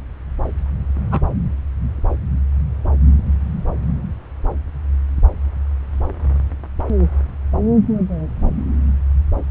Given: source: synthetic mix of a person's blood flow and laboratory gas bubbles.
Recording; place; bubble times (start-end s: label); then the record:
Doppler ultrasound of blood flow; subclavian vein
1.11-1.21 s: bubbles
From the record:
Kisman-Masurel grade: 113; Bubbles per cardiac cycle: 1 to 2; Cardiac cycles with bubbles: 1 to 10%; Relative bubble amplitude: loud (0.450 to 0.775); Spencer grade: 1 (occasional bubble signal discernible with the cardiac motion signal, with majority of cardiac periods free of bubbles); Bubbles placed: anywhere in the cardiac cycle